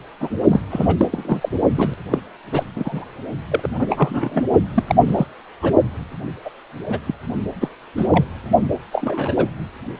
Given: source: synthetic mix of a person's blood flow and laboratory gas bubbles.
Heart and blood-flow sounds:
Doppler ultrasound of blood flow; precordium
0.20-0.29 s: bubbles
0.48-0.60 s: bubbles
0.70-0.94 s: bubbles
0.97-1.07 s: bubbles
1.11-1.49 s: bubbles
1.75-1.94 s: bubbles
2.11-2.19 s: bubbles
2.52-2.63 s: bubbles
2.75-3.05 s: bubbles
3.50-3.69 s: bubbles
3.79-4.42 s: bubbles
4.74-4.83 s: bubbles
4.87-4.95 s: bubbles
5.07-5.27 s: bubbles
5.62-5.75 s: bubbles
6.45-6.50 s: bubbles
6.86-6.99 s: bubbles
7.07-7.14 s: bubbles
7.61-7.69 s: bubbles
7.96-8.08 s: bubbles
8.12-8.24 s: bubbles
8.92-9.47 s: bubbles
From the record:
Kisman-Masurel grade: 242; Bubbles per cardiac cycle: several, 3 to 8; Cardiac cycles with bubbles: 100%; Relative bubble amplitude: moderate (0.250 to 0.450); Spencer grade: 3 (all of the cardiac periods contain showers or single bubble signals, but not dominating or overriding the cardiac motion signals); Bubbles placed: only in the low amplitude regions of the cardiac cycle

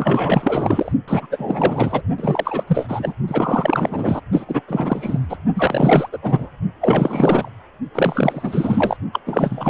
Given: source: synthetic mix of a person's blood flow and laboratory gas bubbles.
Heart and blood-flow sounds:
Doppler ultrasound of blood flow; precordium
0.00-0.92 s: bubbles
1.07-1.26 s: bubbles
1.31-2.02 s: bubbles
2.17-2.64 s: bubbles
2.67-3.14 s: bubbles
3.27-4.21 s: bubbles
4.32-4.45 s: bubbles
4.48-4.62 s: bubbles
4.68-5.38 s: bubbles
5.54-6.09 s: bubbles
6.12-6.19 s: bubbles
6.22-6.49 s: bubbles
6.80-7.50 s: bubbles
7.94-8.96 s: bubbles
9.12-9.20 s: bubbles
9.26-9.70 s: bubbles
From the record:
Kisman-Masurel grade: 444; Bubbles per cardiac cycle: continuous sound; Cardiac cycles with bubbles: 100%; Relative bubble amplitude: maximal (0.775 to 0.999); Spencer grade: 4 (maximum detectable bubble signal sounding continuously throughout systole and diastole of every cardiac period, and overriding the amplitude of the normal cardiac signals); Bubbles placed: only in the low amplitude regions of the cardiac cycle

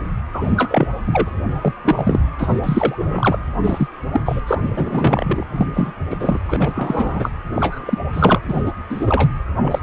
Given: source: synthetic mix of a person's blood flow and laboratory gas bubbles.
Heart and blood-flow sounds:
Doppler ultrasound of blood flow; precordium
0.33-0.88 s: bubbles
1.07-1.29 s: bubbles
1.61-1.73 s: bubbles
1.83-2.20 s: bubbles
2.38-2.96 s: bubbles
2.99-3.38 s: bubbles
3.63-3.88 s: bubbles
4.12-4.21 s: bubbles
4.25-4.41 s: bubbles
4.47-5.46 s: bubbles
5.51-5.67 s: bubbles
5.75-5.93 s: bubbles
6.10-6.38 s: bubbles
6.49-7.31 s: bubbles
7.55-7.98 s: bubbles
8.13-8.39 s: bubbles
8.47-8.62 s: bubbles
8.65-8.71 s: bubbles
8.89-9.28 s: bubbles
9.61-9.83 s: bubbles
From the record:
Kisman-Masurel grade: 243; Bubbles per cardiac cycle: several, 3 to 8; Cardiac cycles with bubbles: 100%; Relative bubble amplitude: loud (0.450 to 0.775); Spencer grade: 3 (all of the cardiac periods contain showers or single bubble signals, but not dominating or overriding the cardiac motion signals); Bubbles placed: anywhere in the cardiac cycle

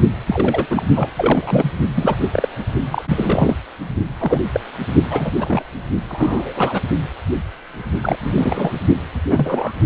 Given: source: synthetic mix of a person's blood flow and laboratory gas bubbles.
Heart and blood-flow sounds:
Doppler ultrasound of blood flow; precordium
0.27-0.66 s: bubbles
0.70-0.83 s: bubbles
0.94-1.09 s: bubbles
1.16-1.70 s: bubbles
1.96-2.50 s: bubbles
2.92-3.02 s: bubbles
3.09-3.56 s: bubbles
4.20-4.43 s: bubbles
4.53-4.60 s: bubbles
5.10-5.31 s: bubbles
5.39-5.62 s: bubbles
6.08-6.81 s: bubbles
8.03-8.17 s: bubbles
8.21-8.74 s: bubbles
9.30-9.74 s: bubbles
From the record:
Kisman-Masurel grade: 232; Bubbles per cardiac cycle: several, 3 to 8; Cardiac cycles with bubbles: 50 to 99%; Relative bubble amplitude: moderate (0.250 to 0.450); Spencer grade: 3 (all of the cardiac periods contain showers or single bubble signals, but not dominating or overriding the cardiac motion signals); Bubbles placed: only in the low amplitude regions of the cardiac cycle

